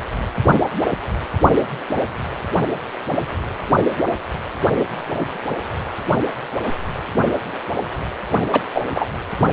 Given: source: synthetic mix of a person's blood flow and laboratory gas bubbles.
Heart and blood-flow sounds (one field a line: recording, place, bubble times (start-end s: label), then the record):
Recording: Doppler ultrasound of blood flow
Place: precordium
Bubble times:
8.52-8.62 s: bubbles
8.74-8.81 s: bubbles
8.95-9.06 s: bubbles
From the record:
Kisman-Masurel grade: 213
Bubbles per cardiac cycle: several, 3 to 8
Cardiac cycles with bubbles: 1 to 10%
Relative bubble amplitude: loud (0.450 to 0.775)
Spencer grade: 1 (occasional bubble signal discernible with the cardiac motion signal, with majority of cardiac periods free of bubbles)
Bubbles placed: only in the low amplitude regions of the cardiac cycle